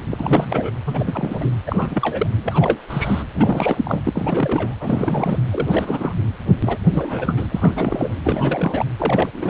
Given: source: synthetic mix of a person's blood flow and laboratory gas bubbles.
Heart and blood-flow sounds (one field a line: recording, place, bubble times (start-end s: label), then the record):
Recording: Doppler ultrasound of blood flow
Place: precordium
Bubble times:
0.10-0.71 s: bubbles
0.85-1.50 s: bubbles
1.67-2.27 s: bubbles
2.43-2.79 s: bubbles
2.89-3.24 s: bubbles
3.33-3.77 s: bubbles
3.84-4.02 s: bubbles
4.05-4.76 s: bubbles
4.80-5.39 s: bubbles
5.51-6.13 s: bubbles
6.60-6.78 s: bubbles
6.91-7.46 s: bubbles
7.52-8.18 s: bubbles
8.23-8.86 s: bubbles
8.98-9.29 s: bubbles
9.33-9.50 s: bubbles
From the record:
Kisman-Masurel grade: 342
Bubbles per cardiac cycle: rolling drumbeat, 9 or more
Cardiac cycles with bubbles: 100%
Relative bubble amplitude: moderate (0.250 to 0.450)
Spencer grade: 3 (all of the cardiac periods contain showers or single bubble signals, but not dominating or overriding the cardiac motion signals)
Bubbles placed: anywhere in the cardiac cycle